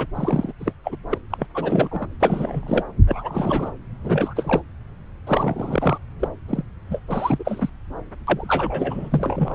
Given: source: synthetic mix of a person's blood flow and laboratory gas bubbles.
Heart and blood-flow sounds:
Doppler ultrasound of blood flow; subclavian vein
0.00-0.07 s: bubbles
0.15-0.53 s: bubbles
0.59-0.73 s: bubbles
0.84-0.96 s: bubbles
1.09-1.18 s: bubbles
1.30-1.46 s: bubbles
1.53-2.07 s: bubbles
2.20-2.83 s: bubbles
3.07-3.72 s: bubbles
4.03-4.62 s: bubbles
5.26-5.98 s: bubbles
6.19-6.28 s: bubbles
6.47-6.62 s: bubbles
6.90-7.02 s: bubbles
7.08-7.70 s: bubbles
8.27-9.55 s: bubbles
From the record:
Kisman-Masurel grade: 343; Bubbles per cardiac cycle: rolling drumbeat, 9 or more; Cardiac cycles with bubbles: 100%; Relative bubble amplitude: loud (0.450 to 0.775); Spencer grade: 3 (all of the cardiac periods contain showers or single bubble signals, but not dominating or overriding the cardiac motion signals); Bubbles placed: anywhere in the cardiac cycle

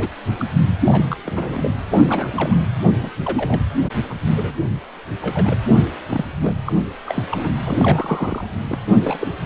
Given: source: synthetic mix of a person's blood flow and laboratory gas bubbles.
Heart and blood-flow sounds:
Doppler ultrasound of blood flow; precordium
0.00-0.09 s: bubbles
0.39-0.46 s: bubbles
0.85-1.17 s: bubbles
1.25-1.72 s: bubbles
1.90-2.56 s: bubbles
2.83-2.89 s: bubbles
2.98-3.10 s: bubbles
3.25-3.61 s: bubbles
4.10-4.14 s: bubbles
4.35-4.54 s: bubbles
5.22-5.56 s: bubbles
6.10-6.25 s: bubbles
6.42-6.53 s: bubbles
6.64-6.72 s: bubbles
7.06-7.24 s: bubbles
7.30-7.50 s: bubbles
7.65-8.47 s: bubbles
8.67-8.79 s: bubbles
9.04-9.27 s: bubbles
From the record:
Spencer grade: 3 (all of the cardiac periods contain showers or single bubble signals, but not dominating or overriding the cardiac motion signals); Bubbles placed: anywhere in the cardiac cycle

